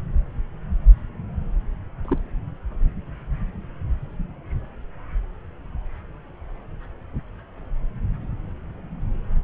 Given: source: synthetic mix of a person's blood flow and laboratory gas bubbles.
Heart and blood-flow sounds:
Doppler ultrasound of blood flow; subclavian vein
2.04-2.18 s: bubbles
From the record:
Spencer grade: 1 (occasional bubble signal discernible with the cardiac motion signal, with majority of cardiac periods free of bubbles); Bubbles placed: anywhere in the cardiac cycle

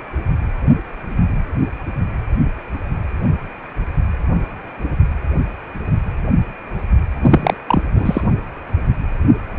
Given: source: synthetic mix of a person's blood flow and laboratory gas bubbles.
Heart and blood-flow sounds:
Doppler ultrasound of blood flow; precordium
7.21-7.54 s: bubbles
7.67-7.83 s: bubbles
7.95-8.22 s: bubbles
From the record:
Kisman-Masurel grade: 213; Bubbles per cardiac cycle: several, 3 to 8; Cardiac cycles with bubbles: 1 to 10%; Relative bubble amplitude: loud (0.450 to 0.775); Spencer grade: 1 (occasional bubble signal discernible with the cardiac motion signal, with majority of cardiac periods free of bubbles); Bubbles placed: anywhere in the cardiac cycle

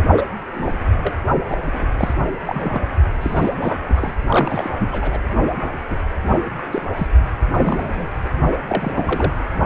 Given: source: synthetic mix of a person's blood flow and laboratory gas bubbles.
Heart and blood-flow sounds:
Doppler ultrasound of blood flow; precordium
0.00-0.06 s: bubbles
0.17-0.25 s: bubbles
0.54-0.73 s: bubbles
0.97-1.11 s: bubbles
1.49-1.61 s: bubbles
1.73-1.86 s: bubbles
1.97-2.14 s: bubbles
2.46-2.80 s: bubbles
3.21-3.50 s: bubbles
3.60-3.79 s: bubbles
3.89-4.13 s: bubbles
4.29-4.70 s: bubbles
4.79-5.20 s: bubbles
5.90-5.98 s: bubbles
6.71-6.82 s: bubbles
6.96-7.07 s: bubbles
7.53-8.07 s: bubbles
8.24-8.29 s: bubbles
8.67-9.33 s: bubbles
From the record:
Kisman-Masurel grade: 242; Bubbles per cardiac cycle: several, 3 to 8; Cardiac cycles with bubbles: 100%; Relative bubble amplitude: moderate (0.250 to 0.450); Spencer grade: 3 (all of the cardiac periods contain showers or single bubble signals, but not dominating or overriding the cardiac motion signals); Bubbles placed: only in the low amplitude regions of the cardiac cycle

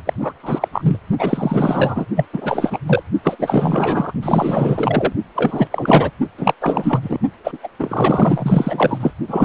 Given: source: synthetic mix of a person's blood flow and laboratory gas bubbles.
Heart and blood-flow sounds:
Doppler ultrasound of blood flow; precordium
0.05-0.14 s: bubbles
0.18-0.33 s: bubbles
0.42-0.68 s: bubbles
0.72-0.97 s: bubbles
1.19-2.06 s: bubbles
2.16-2.25 s: bubbles
2.33-2.79 s: bubbles
2.86-3.02 s: bubbles
3.23-3.36 s: bubbles
3.38-4.12 s: bubbles
4.22-5.12 s: bubbles
5.35-5.68 s: bubbles
5.71-6.11 s: bubbles
6.38-6.54 s: bubbles
6.61-6.99 s: bubbles
7.02-7.18 s: bubbles
7.44-7.58 s: bubbles
7.63-7.68 s: bubbles
7.79-9.11 s: bubbles
9.28-9.44 s: bubbles
From the record:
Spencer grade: 4 (maximum detectable bubble signal sounding continuously throughout systole and diastole of every cardiac period, and overriding the amplitude of the normal cardiac signals); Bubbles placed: only in the low amplitude regions of the cardiac cycle

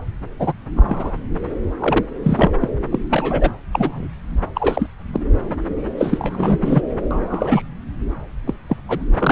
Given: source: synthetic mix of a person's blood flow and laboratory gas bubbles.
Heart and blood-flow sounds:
Doppler ultrasound of blood flow; subclavian vein
0.39-0.52 s: bubbles
0.76-1.17 s: bubbles
1.79-2.06 s: bubbles
2.23-2.52 s: bubbles
2.60-2.69 s: bubbles
2.90-2.99 s: bubbles
3.10-3.50 s: bubbles
3.72-4.08 s: bubbles
4.37-4.39 s: bubbles
4.55-4.87 s: bubbles
5.12-5.20 s: bubbles
5.98-6.58 s: bubbles
6.62-6.82 s: bubbles
7.11-7.62 s: bubbles
8.46-8.54 s: bubbles
8.69-8.77 s: bubbles
8.88-9.00 s: bubbles
9.21-9.32 s: bubbles
From the record:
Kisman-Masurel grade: 232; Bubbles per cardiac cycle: several, 3 to 8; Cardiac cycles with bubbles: 50 to 99%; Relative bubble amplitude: moderate (0.250 to 0.450); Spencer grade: 3 (all of the cardiac periods contain showers or single bubble signals, but not dominating or overriding the cardiac motion signals); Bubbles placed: anywhere in the cardiac cycle

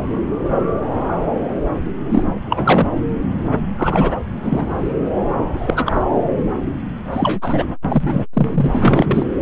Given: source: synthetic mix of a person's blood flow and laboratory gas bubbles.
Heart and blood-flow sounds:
Doppler ultrasound of blood flow; subclavian vein
2.09-2.25 s: bubbles
2.46-2.86 s: bubbles
3.76-4.20 s: bubbles
4.43-4.93 s: bubbles
5.53-6.00 s: bubbles
7.12-7.66 s: bubbles
7.88-8.24 s: bubbles
8.33-8.71 s: bubbles
8.74-9.26 s: bubbles
From the record:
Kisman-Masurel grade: 223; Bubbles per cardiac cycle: several, 3 to 8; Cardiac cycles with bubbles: 10 to 50%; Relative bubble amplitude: loud (0.450 to 0.775); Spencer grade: 2 (many but less than half of the cardiac periods contain bubble signals, singularly or in groups); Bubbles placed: anywhere in the cardiac cycle

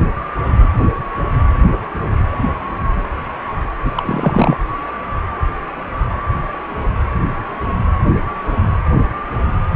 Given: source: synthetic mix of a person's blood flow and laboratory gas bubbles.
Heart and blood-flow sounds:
Doppler ultrasound of blood flow; precordium
3.85-3.92 s: bubbles
3.96-4.57 s: bubbles
From the record:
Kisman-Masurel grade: 212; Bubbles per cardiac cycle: several, 3 to 8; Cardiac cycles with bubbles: 1 to 10%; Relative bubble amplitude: moderate (0.250 to 0.450); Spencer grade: 1 (occasional bubble signal discernible with the cardiac motion signal, with majority of cardiac periods free of bubbles); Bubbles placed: anywhere in the cardiac cycle

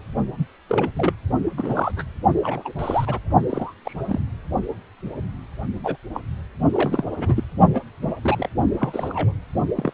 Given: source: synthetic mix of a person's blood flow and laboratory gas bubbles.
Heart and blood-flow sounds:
Doppler ultrasound of blood flow; precordium
0.38-0.46 s: bubbles
0.69-0.91 s: bubbles
0.95-1.15 s: bubbles
1.57-1.92 s: bubbles
1.96-2.04 s: bubbles
2.36-2.73 s: bubbles
2.79-3.19 s: bubbles
3.50-3.73 s: bubbles
3.85-4.21 s: bubbles
5.83-5.96 s: bubbles
6.14-6.21 s: bubbles
6.72-7.08 s: bubbles
7.17-7.44 s: bubbles
7.74-7.81 s: bubbles
8.01-8.13 s: bubbles
8.24-8.48 s: bubbles
8.78-9.32 s: bubbles
9.76-9.91 s: bubbles
From the record:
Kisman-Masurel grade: 232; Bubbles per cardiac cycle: several, 3 to 8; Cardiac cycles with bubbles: 50 to 99%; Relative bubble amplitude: moderate (0.250 to 0.450); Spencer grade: 3 (all of the cardiac periods contain showers or single bubble signals, but not dominating or overriding the cardiac motion signals); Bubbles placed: only in the low amplitude regions of the cardiac cycle

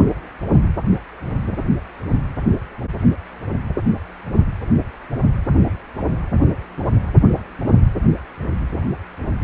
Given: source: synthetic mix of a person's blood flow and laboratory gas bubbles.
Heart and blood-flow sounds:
Doppler ultrasound of blood flow; precordium
no bubbles
From the record:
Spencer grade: 0 (complete lack of bubble signals)

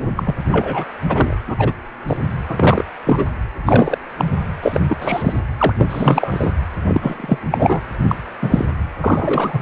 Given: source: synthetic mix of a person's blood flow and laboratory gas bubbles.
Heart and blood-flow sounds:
Doppler ultrasound of blood flow; precordium
0.15-0.24 s: bubbles
0.26-0.34 s: bubbles
0.52-0.84 s: bubbles
1.09-1.36 s: bubbles
1.47-1.72 s: bubbles
2.07-2.18 s: bubbles
2.48-2.85 s: bubbles
3.06-3.25 s: bubbles
3.66-3.98 s: bubbles
4.17-4.25 s: bubbles
4.62-4.80 s: bubbles
4.88-5.40 s: bubbles
5.57-5.73 s: bubbles
5.78-6.51 s: bubbles
6.88-7.39 s: bubbles
7.50-7.80 s: bubbles
8.07-8.15 s: bubbles
8.42-8.65 s: bubbles
9.01-9.62 s: bubbles
From the record:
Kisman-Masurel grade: 243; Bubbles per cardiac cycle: several, 3 to 8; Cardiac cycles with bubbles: 100%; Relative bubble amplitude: loud (0.450 to 0.775); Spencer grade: 3 (all of the cardiac periods contain showers or single bubble signals, but not dominating or overriding the cardiac motion signals); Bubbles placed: anywhere in the cardiac cycle

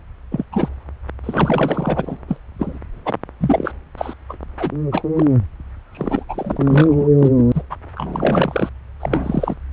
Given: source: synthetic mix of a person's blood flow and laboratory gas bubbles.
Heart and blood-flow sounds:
Doppler ultrasound of blood flow; subclavian vein
0.31-0.45 s: bubbles
0.52-0.68 s: bubbles
1.23-2.17 s: bubbles
2.28-2.40 s: bubbles
2.59-2.79 s: bubbles
3.05-3.14 s: bubbles
3.41-3.73 s: bubbles
3.98-4.13 s: bubbles
4.29-4.37 s: bubbles
4.58-4.72 s: bubbles
4.92-5.04 s: bubbles
5.16-5.25 s: bubbles
5.92-6.25 s: bubbles
6.29-7.08 s: bubbles
7.17-7.29 s: bubbles
7.37-7.44 s: bubbles
7.54-7.63 s: bubbles
7.70-7.75 s: bubbles
7.96-8.69 s: bubbles
8.99-9.55 s: bubbles
From the record:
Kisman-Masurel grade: 242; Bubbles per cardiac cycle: several, 3 to 8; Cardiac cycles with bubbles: 100%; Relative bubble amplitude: moderate (0.250 to 0.450); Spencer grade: 3 (all of the cardiac periods contain showers or single bubble signals, but not dominating or overriding the cardiac motion signals); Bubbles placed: anywhere in the cardiac cycle

